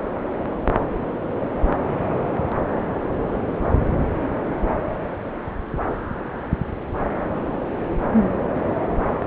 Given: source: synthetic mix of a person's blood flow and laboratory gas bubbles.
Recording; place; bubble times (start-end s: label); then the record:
Doppler ultrasound of blood flow; subclavian vein
no bubbles
From the record:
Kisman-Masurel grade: 000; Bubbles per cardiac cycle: 0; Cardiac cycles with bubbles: 0%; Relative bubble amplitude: no bubbles discernible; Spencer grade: 0 (complete lack of bubble signals)